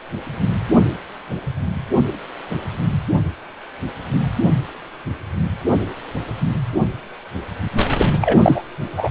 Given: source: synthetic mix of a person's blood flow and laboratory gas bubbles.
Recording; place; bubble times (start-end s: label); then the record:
Doppler ultrasound of blood flow; precordium
7.98-8.11 s: bubbles
8.21-8.38 s: bubbles
8.42-8.63 s: bubbles
8.96-9.11 s: bubbles
From the record:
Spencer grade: 1 (occasional bubble signal discernible with the cardiac motion signal, with majority of cardiac periods free of bubbles); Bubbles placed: anywhere in the cardiac cycle